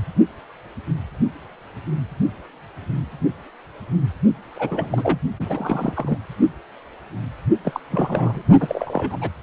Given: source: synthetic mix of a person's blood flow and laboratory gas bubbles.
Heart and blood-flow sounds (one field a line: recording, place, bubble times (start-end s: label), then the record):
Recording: Doppler ultrasound of blood flow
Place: precordium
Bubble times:
4.54-5.19 s: bubbles
5.42-6.18 s: bubbles
7.63-7.80 s: bubbles
7.88-8.42 s: bubbles
8.60-9.17 s: bubbles
9.21-9.30 s: bubbles
From the record:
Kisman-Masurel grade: 232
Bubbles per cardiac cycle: several, 3 to 8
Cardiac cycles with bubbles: 50 to 99%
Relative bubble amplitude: moderate (0.250 to 0.450)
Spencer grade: 3 (all of the cardiac periods contain showers or single bubble signals, but not dominating or overriding the cardiac motion signals)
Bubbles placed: only in the low amplitude regions of the cardiac cycle